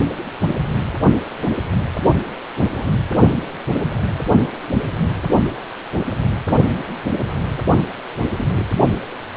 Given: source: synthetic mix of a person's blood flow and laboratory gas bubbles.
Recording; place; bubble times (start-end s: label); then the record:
Doppler ultrasound of blood flow; precordium
2.72-2.93 s: bubbles
8.37-8.64 s: bubbles
From the record:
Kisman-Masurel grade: 121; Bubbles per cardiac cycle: 1 to 2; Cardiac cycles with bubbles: 10 to 50%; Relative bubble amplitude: barely perceptible (0.100 to 0.250); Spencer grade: 2 (many but less than half of the cardiac periods contain bubble signals, singularly or in groups); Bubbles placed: only in the low amplitude regions of the cardiac cycle